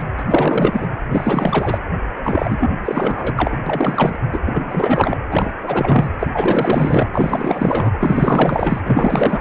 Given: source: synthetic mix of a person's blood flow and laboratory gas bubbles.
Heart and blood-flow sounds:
Doppler ultrasound of blood flow; precordium
0.00-0.02 s: bubbles
0.17-0.88 s: bubbles
1.11-1.80 s: bubbles
2.24-2.71 s: bubbles
2.85-3.58 s: bubbles
3.66-4.15 s: bubbles
4.32-4.40 s: bubbles
4.44-5.17 s: bubbles
5.31-5.54 s: bubbles
5.62-6.10 s: bubbles
6.19-6.27 s: bubbles
6.33-7.07 s: bubbles
7.12-7.92 s: bubbles
8.01-8.80 s: bubbles
8.85-9.41 s: bubbles
From the record:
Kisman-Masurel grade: 444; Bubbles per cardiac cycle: continuous sound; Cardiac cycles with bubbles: 100%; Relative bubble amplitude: maximal (0.775 to 0.999); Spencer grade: 4 (maximum detectable bubble signal sounding continuously throughout systole and diastole of every cardiac period, and overriding the amplitude of the normal cardiac signals); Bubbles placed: anywhere in the cardiac cycle

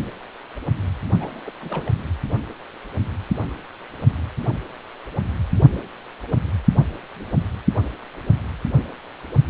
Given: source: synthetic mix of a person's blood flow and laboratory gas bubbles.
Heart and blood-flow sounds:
Doppler ultrasound of blood flow; precordium
1.21-1.51 s: bubbles
1.60-1.92 s: bubbles
From the record:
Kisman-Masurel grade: 211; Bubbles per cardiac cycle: several, 3 to 8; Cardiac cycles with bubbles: 1 to 10%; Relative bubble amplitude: barely perceptible (0.100 to 0.250); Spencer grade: 1 (occasional bubble signal discernible with the cardiac motion signal, with majority of cardiac periods free of bubbles); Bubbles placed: only in the low amplitude regions of the cardiac cycle

